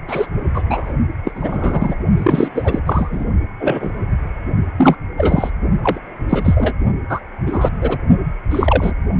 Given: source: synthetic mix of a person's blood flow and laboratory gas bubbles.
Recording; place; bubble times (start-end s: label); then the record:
Doppler ultrasound of blood flow; precordium
0.08-0.27 s: bubbles
0.54-0.62 s: bubbles
0.69-0.94 s: bubbles
1.24-1.32 s: bubbles
1.35-1.95 s: bubbles
2.17-2.48 s: bubbles
2.54-2.79 s: bubbles
2.86-3.25 s: bubbles
3.59-3.91 s: bubbles
4.78-4.97 s: bubbles
5.17-5.50 s: bubbles
5.83-6.00 s: bubbles
6.29-6.74 s: bubbles
7.09-7.20 s: bubbles
7.46-7.70 s: bubbles
7.80-7.98 s: bubbles
8.51-8.93 s: bubbles
From the record:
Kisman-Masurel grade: 243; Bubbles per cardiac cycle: several, 3 to 8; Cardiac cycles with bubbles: 100%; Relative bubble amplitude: loud (0.450 to 0.775); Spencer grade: 3 (all of the cardiac periods contain showers or single bubble signals, but not dominating or overriding the cardiac motion signals); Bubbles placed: only in the low amplitude regions of the cardiac cycle